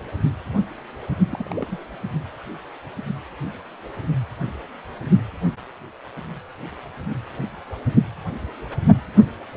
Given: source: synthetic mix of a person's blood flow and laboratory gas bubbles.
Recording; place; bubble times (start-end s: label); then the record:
Doppler ultrasound of blood flow; precordium
1.32-1.84 s: bubbles
From the record:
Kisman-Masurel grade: 111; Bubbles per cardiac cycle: 1 to 2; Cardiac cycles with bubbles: 1 to 10%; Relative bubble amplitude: barely perceptible (0.100 to 0.250); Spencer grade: 1 (occasional bubble signal discernible with the cardiac motion signal, with majority of cardiac periods free of bubbles); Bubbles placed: only in the low amplitude regions of the cardiac cycle